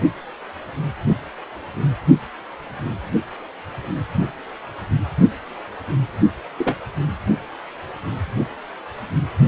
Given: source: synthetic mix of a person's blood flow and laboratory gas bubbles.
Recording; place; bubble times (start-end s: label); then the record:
Doppler ultrasound of blood flow; precordium
6.58-6.75 s: bubbles
From the record:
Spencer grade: 1 (occasional bubble signal discernible with the cardiac motion signal, with majority of cardiac periods free of bubbles); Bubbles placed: anywhere in the cardiac cycle